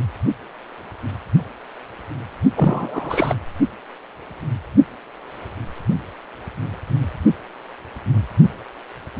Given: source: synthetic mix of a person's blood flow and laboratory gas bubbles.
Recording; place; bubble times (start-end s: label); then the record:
Doppler ultrasound of blood flow; precordium
2.55-3.35 s: bubbles
From the record:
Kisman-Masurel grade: 212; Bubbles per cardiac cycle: several, 3 to 8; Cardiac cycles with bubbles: 1 to 10%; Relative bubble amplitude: moderate (0.250 to 0.450); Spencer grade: 1 (occasional bubble signal discernible with the cardiac motion signal, with majority of cardiac periods free of bubbles); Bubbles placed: only in the low amplitude regions of the cardiac cycle